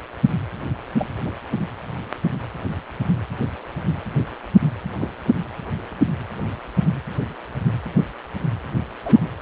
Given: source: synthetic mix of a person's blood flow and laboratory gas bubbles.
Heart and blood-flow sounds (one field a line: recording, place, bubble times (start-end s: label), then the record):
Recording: Doppler ultrasound of blood flow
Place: precordium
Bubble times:
0.98-1.12 s: bubbles
1.25-1.31 s: bubbles
4.98-5.08 s: bubbles
9.01-9.21 s: bubbles
From the record:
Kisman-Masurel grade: 121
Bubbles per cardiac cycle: 1 to 2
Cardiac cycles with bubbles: 10 to 50%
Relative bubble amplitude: barely perceptible (0.100 to 0.250)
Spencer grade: 2 (many but less than half of the cardiac periods contain bubble signals, singularly or in groups)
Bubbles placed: anywhere in the cardiac cycle